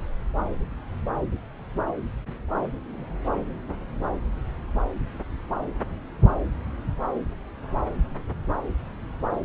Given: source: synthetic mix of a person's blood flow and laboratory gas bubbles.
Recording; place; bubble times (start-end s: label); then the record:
Doppler ultrasound of blood flow; subclavian vein
no bubbles
From the record:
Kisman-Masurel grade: 000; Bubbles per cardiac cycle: 0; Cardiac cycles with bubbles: 0%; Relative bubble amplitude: no bubbles discernible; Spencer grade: 0 (complete lack of bubble signals)